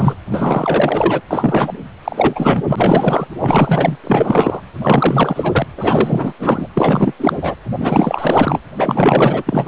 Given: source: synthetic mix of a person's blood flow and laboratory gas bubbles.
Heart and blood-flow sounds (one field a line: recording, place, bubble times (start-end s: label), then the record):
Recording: Doppler ultrasound of blood flow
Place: precordium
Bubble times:
0.00-0.15 s: bubbles
0.28-1.22 s: bubbles
1.30-1.85 s: bubbles
2.04-2.62 s: bubbles
2.67-3.27 s: bubbles
3.39-3.97 s: bubbles
4.04-4.61 s: bubbles
4.81-5.67 s: bubbles
5.77-6.33 s: bubbles
6.39-6.68 s: bubbles
6.74-7.13 s: bubbles
7.18-7.39 s: bubbles
7.42-7.55 s: bubbles
7.79-8.60 s: bubbles
8.77-9.43 s: bubbles
9.46-9.67 s: bubbles
From the record:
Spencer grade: 4 (maximum detectable bubble signal sounding continuously throughout systole and diastole of every cardiac period, and overriding the amplitude of the normal cardiac signals)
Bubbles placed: anywhere in the cardiac cycle